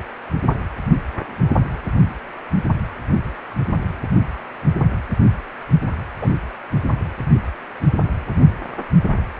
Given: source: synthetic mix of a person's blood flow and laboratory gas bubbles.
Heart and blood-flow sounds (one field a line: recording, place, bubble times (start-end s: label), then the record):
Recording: Doppler ultrasound of blood flow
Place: precordium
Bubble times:
6.21-6.29 s: bubbles
From the record:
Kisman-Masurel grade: 123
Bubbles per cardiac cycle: 1 to 2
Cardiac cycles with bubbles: 10 to 50%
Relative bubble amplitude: loud (0.450 to 0.775)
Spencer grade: 2 (many but less than half of the cardiac periods contain bubble signals, singularly or in groups)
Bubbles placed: anywhere in the cardiac cycle